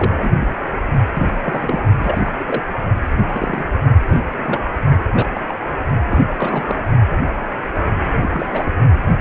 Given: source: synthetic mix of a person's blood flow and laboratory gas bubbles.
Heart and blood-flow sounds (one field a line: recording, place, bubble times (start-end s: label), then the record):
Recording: Doppler ultrasound of blood flow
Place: precordium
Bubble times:
0.00-0.30 s: bubbles
0.40-0.47 s: bubbles
1.15-1.27 s: bubbles
1.35-1.81 s: bubbles
1.98-2.32 s: bubbles
2.39-2.62 s: bubbles
3.27-3.64 s: bubbles
4.07-4.23 s: bubbles
4.39-4.59 s: bubbles
5.15-5.31 s: bubbles
5.34-5.41 s: bubbles
5.48-5.54 s: bubbles
6.09-6.17 s: bubbles
6.27-6.82 s: bubbles
8.21-8.70 s: bubbles
From the record:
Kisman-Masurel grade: 242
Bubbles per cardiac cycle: several, 3 to 8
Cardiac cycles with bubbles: 100%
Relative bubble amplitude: moderate (0.250 to 0.450)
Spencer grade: 3 (all of the cardiac periods contain showers or single bubble signals, but not dominating or overriding the cardiac motion signals)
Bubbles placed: only in the low amplitude regions of the cardiac cycle